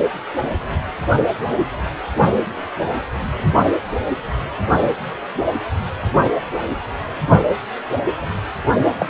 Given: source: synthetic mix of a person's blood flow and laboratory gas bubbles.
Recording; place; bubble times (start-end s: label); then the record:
Doppler ultrasound of blood flow; precordium
8.99-9.06 s: bubbles
From the record:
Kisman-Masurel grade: 122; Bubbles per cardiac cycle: 1 to 2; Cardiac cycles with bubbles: 10 to 50%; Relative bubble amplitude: moderate (0.250 to 0.450); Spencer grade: 2 (many but less than half of the cardiac periods contain bubble signals, singularly or in groups); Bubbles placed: only in the low amplitude regions of the cardiac cycle